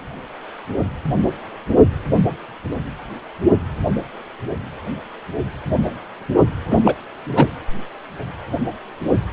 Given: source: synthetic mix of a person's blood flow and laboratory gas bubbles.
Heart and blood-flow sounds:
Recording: Doppler ultrasound of blood flow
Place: precordium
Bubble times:
6.70-6.80 s: bubbles
6.83-6.95 s: bubbles
7.34-7.50 s: bubbles
From the record:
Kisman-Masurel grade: 213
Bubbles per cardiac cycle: several, 3 to 8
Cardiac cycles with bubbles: 1 to 10%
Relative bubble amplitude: loud (0.450 to 0.775)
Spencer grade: 1 (occasional bubble signal discernible with the cardiac motion signal, with majority of cardiac periods free of bubbles)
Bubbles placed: anywhere in the cardiac cycle

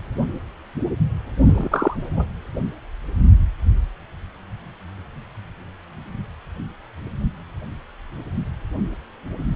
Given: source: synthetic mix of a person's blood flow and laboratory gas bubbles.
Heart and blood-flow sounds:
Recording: Doppler ultrasound of blood flow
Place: precordium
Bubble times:
1.45-2.26 s: bubbles
From the record:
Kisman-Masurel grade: 213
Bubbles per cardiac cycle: several, 3 to 8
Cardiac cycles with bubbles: 1 to 10%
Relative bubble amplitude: loud (0.450 to 0.775)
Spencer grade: 1 (occasional bubble signal discernible with the cardiac motion signal, with majority of cardiac periods free of bubbles)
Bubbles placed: anywhere in the cardiac cycle

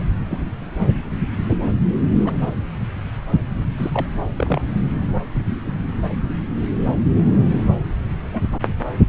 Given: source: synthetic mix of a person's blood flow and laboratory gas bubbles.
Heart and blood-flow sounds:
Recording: Doppler ultrasound of blood flow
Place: subclavian vein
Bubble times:
0.00-0.03 s: bubbles
0.29-0.38 s: bubbles
1.49-1.57 s: bubbles
2.25-2.33 s: bubbles
3.77-4.06 s: bubbles
4.37-4.62 s: bubbles
5.35-5.43 s: bubbles
8.17-8.30 s: bubbles
8.32-8.47 s: bubbles
From the record:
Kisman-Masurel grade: 121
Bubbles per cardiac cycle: 1 to 2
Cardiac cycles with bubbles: 10 to 50%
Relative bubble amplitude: barely perceptible (0.100 to 0.250)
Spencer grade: 2 (many but less than half of the cardiac periods contain bubble signals, singularly or in groups)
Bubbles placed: anywhere in the cardiac cycle

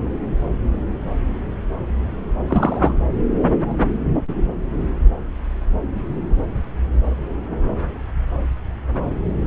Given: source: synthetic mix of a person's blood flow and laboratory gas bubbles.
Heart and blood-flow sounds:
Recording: Doppler ultrasound of blood flow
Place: subclavian vein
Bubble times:
2.48-2.92 s: bubbles
From the record:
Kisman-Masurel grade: 112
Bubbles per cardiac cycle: 1 to 2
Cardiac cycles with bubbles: 1 to 10%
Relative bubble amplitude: moderate (0.250 to 0.450)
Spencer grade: 1 (occasional bubble signal discernible with the cardiac motion signal, with majority of cardiac periods free of bubbles)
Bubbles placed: anywhere in the cardiac cycle

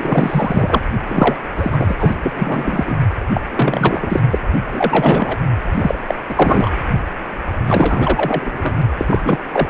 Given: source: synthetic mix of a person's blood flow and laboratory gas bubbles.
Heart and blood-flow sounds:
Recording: Doppler ultrasound of blood flow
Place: precordium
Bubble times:
0.00-0.83 s: bubbles
1.07-1.36 s: bubbles
1.56-1.95 s: bubbles
1.98-2.14 s: bubbles
2.22-2.33 s: bubbles
2.35-2.96 s: bubbles
3.35-3.41 s: bubbles
3.50-4.23 s: bubbles
4.30-4.38 s: bubbles
4.72-5.38 s: bubbles
5.72-5.99 s: bubbles
6.07-6.14 s: bubbles
6.28-6.71 s: bubbles
7.67-8.82 s: bubbles
8.97-9.21 s: bubbles
9.24-9.39 s: bubbles
9.52-9.70 s: bubbles
From the record:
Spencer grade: 3 (all of the cardiac periods contain showers or single bubble signals, but not dominating or overriding the cardiac motion signals)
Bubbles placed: anywhere in the cardiac cycle

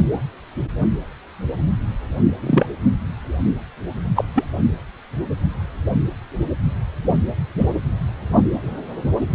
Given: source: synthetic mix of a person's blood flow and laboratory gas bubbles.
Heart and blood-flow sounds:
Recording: Doppler ultrasound of blood flow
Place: precordium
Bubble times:
2.40-2.66 s: bubbles
4.16-4.24 s: bubbles
4.35-4.44 s: bubbles
7.58-7.66 s: bubbles
From the record:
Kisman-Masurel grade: 123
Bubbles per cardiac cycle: 1 to 2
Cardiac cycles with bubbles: 10 to 50%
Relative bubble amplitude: loud (0.450 to 0.775)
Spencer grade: 2 (many but less than half of the cardiac periods contain bubble signals, singularly or in groups)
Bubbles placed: anywhere in the cardiac cycle

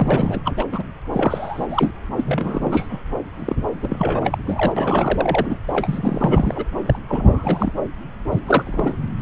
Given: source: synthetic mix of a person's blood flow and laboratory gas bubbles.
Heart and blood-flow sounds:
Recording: Doppler ultrasound of blood flow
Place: subclavian vein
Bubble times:
0.00-0.42 s: bubbles
0.44-0.66 s: bubbles
0.72-0.83 s: bubbles
1.13-1.91 s: bubbles
2.16-3.01 s: bubbles
3.39-3.56 s: bubbles
3.82-4.38 s: bubbles
4.46-5.58 s: bubbles
5.67-6.65 s: bubbles
6.86-6.99 s: bubbles
7.08-7.72 s: bubbles
8.32-8.39 s: bubbles
8.47-8.97 s: bubbles
9.18-9.21 s: bubbles
From the record:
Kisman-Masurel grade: 342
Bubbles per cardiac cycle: rolling drumbeat, 9 or more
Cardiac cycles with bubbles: 100%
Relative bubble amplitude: moderate (0.250 to 0.450)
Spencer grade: 3 (all of the cardiac periods contain showers or single bubble signals, but not dominating or overriding the cardiac motion signals)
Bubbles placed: anywhere in the cardiac cycle

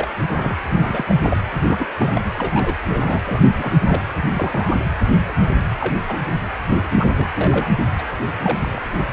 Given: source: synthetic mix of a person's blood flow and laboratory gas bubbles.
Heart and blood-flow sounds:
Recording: Doppler ultrasound of blood flow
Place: precordium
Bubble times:
0.00-0.09 s: bubbles
0.22-0.56 s: bubbles
0.76-1.15 s: bubbles
1.22-1.42 s: bubbles
1.66-1.87 s: bubbles
1.98-2.21 s: bubbles
2.38-2.75 s: bubbles
2.89-3.19 s: bubbles
3.25-3.42 s: bubbles
3.57-4.02 s: bubbles
4.33-4.76 s: bubbles
4.85-4.90 s: bubbles
5.28-5.33 s: bubbles
5.78-6.00 s: bubbles
6.08-6.17 s: bubbles
6.95-7.27 s: bubbles
7.35-7.73 s: bubbles
7.98-8.02 s: bubbles
8.42-8.80 s: bubbles
From the record:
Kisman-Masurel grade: 242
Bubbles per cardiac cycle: several, 3 to 8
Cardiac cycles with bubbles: 100%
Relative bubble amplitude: moderate (0.250 to 0.450)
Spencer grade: 3 (all of the cardiac periods contain showers or single bubble signals, but not dominating or overriding the cardiac motion signals)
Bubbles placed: anywhere in the cardiac cycle

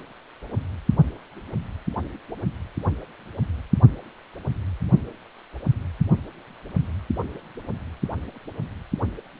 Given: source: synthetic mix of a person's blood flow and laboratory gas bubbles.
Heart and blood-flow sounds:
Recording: Doppler ultrasound of blood flow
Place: precordium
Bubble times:
no bubbles
From the record:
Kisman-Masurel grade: 000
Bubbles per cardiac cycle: 0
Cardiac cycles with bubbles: 0%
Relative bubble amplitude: no bubbles discernible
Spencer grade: 0 (complete lack of bubble signals)

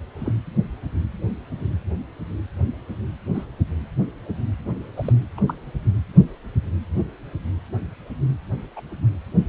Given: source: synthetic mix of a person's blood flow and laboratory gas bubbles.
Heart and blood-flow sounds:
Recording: Doppler ultrasound of blood flow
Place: precordium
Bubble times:
0.20-0.32 s: bubbles
3.34-3.46 s: bubbles
4.96-5.12 s: bubbles
5.37-5.41 s: bubbles
5.47-5.54 s: bubbles
8.76-8.82 s: bubbles
From the record:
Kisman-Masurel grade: 121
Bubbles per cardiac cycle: 1 to 2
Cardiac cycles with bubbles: 10 to 50%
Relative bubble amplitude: barely perceptible (0.100 to 0.250)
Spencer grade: 2 (many but less than half of the cardiac periods contain bubble signals, singularly or in groups)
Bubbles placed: anywhere in the cardiac cycle

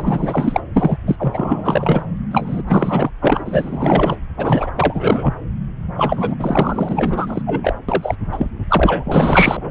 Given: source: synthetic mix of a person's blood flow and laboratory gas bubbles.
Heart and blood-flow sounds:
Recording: Doppler ultrasound of blood flow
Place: subclavian vein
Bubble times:
0.00-0.60 s: bubbles
0.74-0.97 s: bubbles
1.06-1.16 s: bubbles
1.19-2.06 s: bubbles
2.31-2.62 s: bubbles
2.68-3.10 s: bubbles
3.21-4.16 s: bubbles
4.37-4.70 s: bubbles
4.76-5.34 s: bubbles
5.96-6.35 s: bubbles
6.39-7.42 s: bubbles
7.46-7.75 s: bubbles
7.88-8.15 s: bubbles
8.32-8.51 s: bubbles
8.69-9.71 s: bubbles
From the record:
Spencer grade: 4 (maximum detectable bubble signal sounding continuously throughout systole and diastole of every cardiac period, and overriding the amplitude of the normal cardiac signals)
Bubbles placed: anywhere in the cardiac cycle

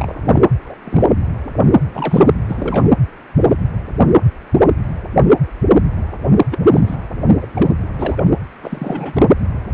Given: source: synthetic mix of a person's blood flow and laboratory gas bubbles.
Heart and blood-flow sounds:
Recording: Doppler ultrasound of blood flow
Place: precordium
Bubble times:
0.00-0.41 s: bubbles
0.65-0.77 s: bubbles
0.84-1.08 s: bubbles
1.93-2.27 s: bubbles
2.47-2.88 s: bubbles
6.38-6.44 s: bubbles
6.51-6.59 s: bubbles
6.73-6.98 s: bubbles
7.40-7.47 s: bubbles
7.54-7.72 s: bubbles
7.82-7.89 s: bubbles
7.99-8.24 s: bubbles
8.62-9.26 s: bubbles
9.39-9.46 s: bubbles
From the record:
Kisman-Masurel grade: 222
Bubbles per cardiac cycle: several, 3 to 8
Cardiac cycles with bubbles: 10 to 50%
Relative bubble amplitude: moderate (0.250 to 0.450)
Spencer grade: 2 (many but less than half of the cardiac periods contain bubble signals, singularly or in groups)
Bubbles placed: anywhere in the cardiac cycle

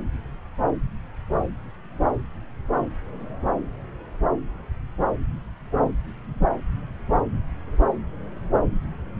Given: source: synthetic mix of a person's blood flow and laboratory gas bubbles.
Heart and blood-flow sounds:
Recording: Doppler ultrasound of blood flow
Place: subclavian vein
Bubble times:
no bubbles
From the record:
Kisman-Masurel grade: 000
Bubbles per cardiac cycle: 0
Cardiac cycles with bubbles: 0%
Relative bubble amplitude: no bubbles discernible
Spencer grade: 0 (complete lack of bubble signals)

